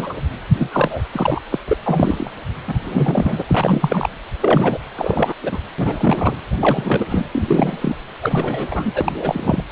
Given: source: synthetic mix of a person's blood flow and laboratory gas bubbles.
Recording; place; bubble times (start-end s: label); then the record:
Doppler ultrasound of blood flow; precordium
0.00-0.14 s: bubbles
0.57-1.02 s: bubbles
1.13-1.41 s: bubbles
1.52-1.59 s: bubbles
1.68-1.77 s: bubbles
1.84-2.31 s: bubbles
2.67-2.75 s: bubbles
2.86-3.42 s: bubbles
3.48-4.10 s: bubbles
4.40-4.79 s: bubbles
4.96-5.33 s: bubbles
5.43-5.58 s: bubbles
5.78-6.37 s: bubbles
6.60-7.27 s: bubbles
7.35-7.96 s: bubbles
8.22-8.68 s: bubbles
8.71-9.12 s: bubbles
9.21-9.63 s: bubbles
9.70-9.72 s: bubbles
From the record:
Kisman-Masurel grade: 333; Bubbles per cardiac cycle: rolling drumbeat, 9 or more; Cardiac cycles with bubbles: 50 to 99%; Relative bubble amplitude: loud (0.450 to 0.775); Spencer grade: 3 (all of the cardiac periods contain showers or single bubble signals, but not dominating or overriding the cardiac motion signals); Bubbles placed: anywhere in the cardiac cycle